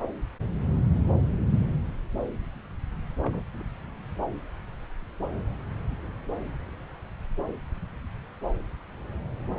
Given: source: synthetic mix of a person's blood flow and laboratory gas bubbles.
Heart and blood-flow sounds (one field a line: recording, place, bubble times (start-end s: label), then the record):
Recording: Doppler ultrasound of blood flow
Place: subclavian vein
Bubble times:
3.23-3.43 s: bubbles
3.54-3.62 s: bubbles
From the record:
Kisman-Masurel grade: 211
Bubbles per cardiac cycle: several, 3 to 8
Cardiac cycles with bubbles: 1 to 10%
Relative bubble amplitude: barely perceptible (0.100 to 0.250)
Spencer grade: 1 (occasional bubble signal discernible with the cardiac motion signal, with majority of cardiac periods free of bubbles)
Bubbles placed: anywhere in the cardiac cycle